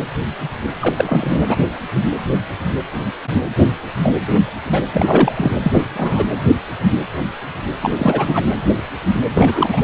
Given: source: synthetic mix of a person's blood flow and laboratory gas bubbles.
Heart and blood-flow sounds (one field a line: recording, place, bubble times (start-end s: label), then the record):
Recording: Doppler ultrasound of blood flow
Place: precordium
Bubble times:
0.80-1.55 s: bubbles
4.03-4.20 s: bubbles
4.72-4.82 s: bubbles
4.92-5.52 s: bubbles
5.63-5.82 s: bubbles
5.95-6.26 s: bubbles
7.82-8.45 s: bubbles
9.34-9.84 s: bubbles
From the record:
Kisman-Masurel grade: 223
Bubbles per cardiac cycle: several, 3 to 8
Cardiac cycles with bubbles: 10 to 50%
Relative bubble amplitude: loud (0.450 to 0.775)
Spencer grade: 2 (many but less than half of the cardiac periods contain bubble signals, singularly or in groups)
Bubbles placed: anywhere in the cardiac cycle